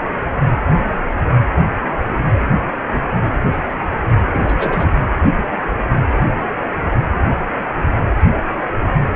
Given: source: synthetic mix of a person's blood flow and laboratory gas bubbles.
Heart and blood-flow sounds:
Doppler ultrasound of blood flow; precordium
4.25-5.00 s: bubbles
From the record:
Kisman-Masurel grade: 211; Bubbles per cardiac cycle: several, 3 to 8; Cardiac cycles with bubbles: 1 to 10%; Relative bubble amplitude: barely perceptible (0.100 to 0.250); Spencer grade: 1 (occasional bubble signal discernible with the cardiac motion signal, with majority of cardiac periods free of bubbles); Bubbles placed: anywhere in the cardiac cycle

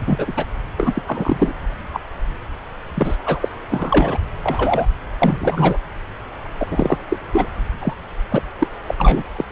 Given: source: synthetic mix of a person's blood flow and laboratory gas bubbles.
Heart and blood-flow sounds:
Doppler ultrasound of blood flow; subclavian vein
0.06-0.33 s: bubbles
0.36-0.46 s: bubbles
0.77-1.02 s: bubbles
1.07-1.55 s: bubbles
1.94-2.00 s: bubbles
2.94-3.17 s: bubbles
3.25-3.48 s: bubbles
3.71-4.18 s: bubbles
4.43-4.86 s: bubbles
5.21-5.77 s: bubbles
6.57-6.98 s: bubbles
7.09-7.16 s: bubbles
7.32-7.46 s: bubbles
7.81-7.94 s: bubbles
8.29-8.42 s: bubbles
8.58-8.67 s: bubbles
8.87-8.95 s: bubbles
8.97-9.23 s: bubbles
9.35-9.45 s: bubbles
From the record:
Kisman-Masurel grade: 243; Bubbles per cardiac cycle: several, 3 to 8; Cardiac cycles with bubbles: 100%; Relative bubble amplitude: loud (0.450 to 0.775); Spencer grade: 3 (all of the cardiac periods contain showers or single bubble signals, but not dominating or overriding the cardiac motion signals); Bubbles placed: anywhere in the cardiac cycle

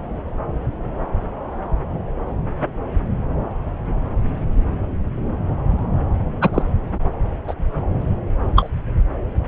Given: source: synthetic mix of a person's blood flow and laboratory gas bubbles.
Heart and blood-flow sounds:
Doppler ultrasound of blood flow; subclavian vein
6.41-6.50 s: bubbles
6.53-6.62 s: bubbles
7.47-7.54 s: bubbles
8.55-8.70 s: bubbles
From the record:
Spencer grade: 2 (many but less than half of the cardiac periods contain bubble signals, singularly or in groups); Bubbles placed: anywhere in the cardiac cycle

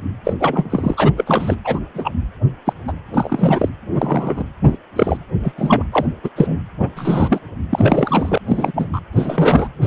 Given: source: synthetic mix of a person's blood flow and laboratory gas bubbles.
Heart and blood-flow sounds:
Doppler ultrasound of blood flow; precordium
0.24-0.33 s: bubbles
0.40-1.12 s: bubbles
1.17-1.55 s: bubbles
1.64-1.79 s: bubbles
1.94-2.11 s: bubbles
2.65-2.73 s: bubbles
2.88-2.93 s: bubbles
3.13-3.69 s: bubbles
3.92-4.43 s: bubbles
4.63-4.77 s: bubbles
4.96-5.19 s: bubbles
5.43-5.53 s: bubbles
5.57-5.83 s: bubbles
5.92-6.06 s: bubbles
6.24-6.30 s: bubbles
6.36-6.58 s: bubbles
6.79-6.89 s: bubbles
6.96-7.40 s: bubbles
7.71-8.38 s: bubbles
8.48-9.01 s: bubbles
9.12-9.68 s: bubbles
9.81-9.87 s: bubbles
From the record:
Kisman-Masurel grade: 243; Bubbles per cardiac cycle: several, 3 to 8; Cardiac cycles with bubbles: 100%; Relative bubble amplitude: loud (0.450 to 0.775); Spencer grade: 3 (all of the cardiac periods contain showers or single bubble signals, but not dominating or overriding the cardiac motion signals); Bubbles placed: anywhere in the cardiac cycle

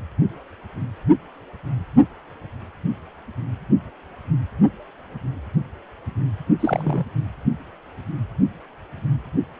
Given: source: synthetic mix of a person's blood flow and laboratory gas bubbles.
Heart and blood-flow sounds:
Doppler ultrasound of blood flow; precordium
6.59-7.05 s: bubbles
From the record:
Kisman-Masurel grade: 212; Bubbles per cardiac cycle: several, 3 to 8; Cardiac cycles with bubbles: 1 to 10%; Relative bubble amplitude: moderate (0.250 to 0.450); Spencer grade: 1 (occasional bubble signal discernible with the cardiac motion signal, with majority of cardiac periods free of bubbles); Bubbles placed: only in the low amplitude regions of the cardiac cycle

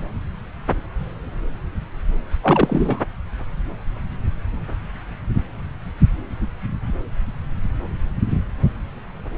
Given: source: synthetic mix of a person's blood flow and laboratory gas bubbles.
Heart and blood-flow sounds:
Doppler ultrasound of blood flow; subclavian vein
2.43-3.00 s: bubbles
From the record:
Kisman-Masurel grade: 223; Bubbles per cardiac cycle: several, 3 to 8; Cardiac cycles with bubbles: 10 to 50%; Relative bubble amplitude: loud (0.450 to 0.775); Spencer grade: 2 (many but less than half of the cardiac periods contain bubble signals, singularly or in groups); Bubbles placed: anywhere in the cardiac cycle

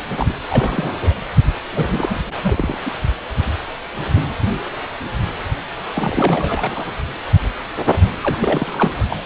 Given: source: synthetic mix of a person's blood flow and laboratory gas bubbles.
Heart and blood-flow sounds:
Doppler ultrasound of blood flow; precordium
0.17-0.34 s: bubbles
0.49-1.14 s: bubbles
1.75-2.78 s: bubbles
2.85-2.93 s: bubbles
5.95-6.95 s: bubbles
8.21-9.07 s: bubbles
9.10-9.17 s: bubbles
From the record:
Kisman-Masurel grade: 332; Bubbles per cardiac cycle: rolling drumbeat, 9 or more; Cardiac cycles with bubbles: 50 to 99%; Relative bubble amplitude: moderate (0.250 to 0.450); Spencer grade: 3 (all of the cardiac periods contain showers or single bubble signals, but not dominating or overriding the cardiac motion signals); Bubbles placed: anywhere in the cardiac cycle

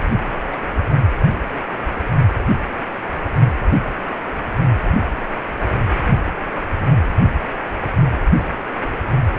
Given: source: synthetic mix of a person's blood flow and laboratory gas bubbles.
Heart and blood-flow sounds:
Doppler ultrasound of blood flow; precordium
0.53-0.58 s: bubbles
0.90-0.94 s: bubbles
From the record:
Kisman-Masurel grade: 111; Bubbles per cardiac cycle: 1 to 2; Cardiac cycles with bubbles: 1 to 10%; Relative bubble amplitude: barely perceptible (0.100 to 0.250); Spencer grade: 1 (occasional bubble signal discernible with the cardiac motion signal, with majority of cardiac periods free of bubbles); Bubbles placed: anywhere in the cardiac cycle

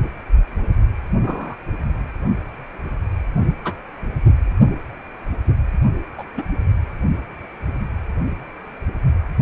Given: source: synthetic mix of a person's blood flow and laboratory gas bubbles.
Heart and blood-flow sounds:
Doppler ultrasound of blood flow; precordium
1.23-1.54 s: bubbles
3.65-3.73 s: bubbles
6.18-6.23 s: bubbles
6.37-6.44 s: bubbles
From the record:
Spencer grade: 2 (many but less than half of the cardiac periods contain bubble signals, singularly or in groups); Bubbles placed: anywhere in the cardiac cycle

